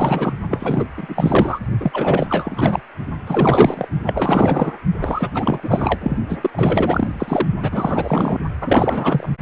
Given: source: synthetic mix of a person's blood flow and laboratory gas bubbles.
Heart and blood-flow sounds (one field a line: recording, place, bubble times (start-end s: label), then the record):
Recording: Doppler ultrasound of blood flow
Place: precordium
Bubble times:
0.00-0.33 s: bubbles
0.49-0.88 s: bubbles
0.97-1.59 s: bubbles
1.80-2.81 s: bubbles
3.27-3.88 s: bubbles
4.03-4.73 s: bubbles
5.00-5.31 s: bubbles
5.33-6.16 s: bubbles
6.29-6.38 s: bubbles
6.42-6.50 s: bubbles
6.52-7.46 s: bubbles
7.62-8.39 s: bubbles
8.61-9.29 s: bubbles
From the record:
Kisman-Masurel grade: 444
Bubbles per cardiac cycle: continuous sound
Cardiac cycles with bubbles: 100%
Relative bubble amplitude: maximal (0.775 to 0.999)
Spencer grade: 4 (maximum detectable bubble signal sounding continuously throughout systole and diastole of every cardiac period, and overriding the amplitude of the normal cardiac signals)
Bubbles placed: only in the low amplitude regions of the cardiac cycle